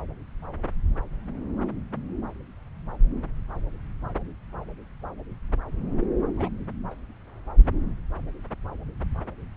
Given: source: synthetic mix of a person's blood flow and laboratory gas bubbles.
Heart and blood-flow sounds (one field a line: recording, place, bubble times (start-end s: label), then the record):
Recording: Doppler ultrasound of blood flow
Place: subclavian vein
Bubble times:
6.37-6.65 s: bubbles
6.91-6.94 s: bubbles
From the record:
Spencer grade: 1 (occasional bubble signal discernible with the cardiac motion signal, with majority of cardiac periods free of bubbles)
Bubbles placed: anywhere in the cardiac cycle